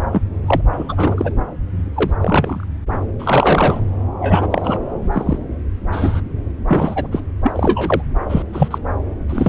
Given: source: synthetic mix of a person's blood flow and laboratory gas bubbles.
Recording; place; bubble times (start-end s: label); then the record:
Doppler ultrasound of blood flow; subclavian vein
0.12-0.22 s: bubbles
0.47-0.61 s: bubbles
0.73-1.33 s: bubbles
1.95-2.10 s: bubbles
2.20-2.65 s: bubbles
2.91-2.95 s: bubbles
3.19-3.80 s: bubbles
4.20-4.47 s: bubbles
4.50-4.79 s: bubbles
5.12-5.39 s: bubbles
5.92-6.21 s: bubbles
6.68-7.08 s: bubbles
7.11-7.21 s: bubbles
7.44-8.02 s: bubbles
8.29-8.43 s: bubbles
8.53-8.79 s: bubbles
9.29-9.48 s: bubbles
From the record:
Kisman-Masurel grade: 243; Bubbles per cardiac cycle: several, 3 to 8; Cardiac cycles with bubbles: 100%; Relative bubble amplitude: loud (0.450 to 0.775); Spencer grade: 3 (all of the cardiac periods contain showers or single bubble signals, but not dominating or overriding the cardiac motion signals); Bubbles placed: anywhere in the cardiac cycle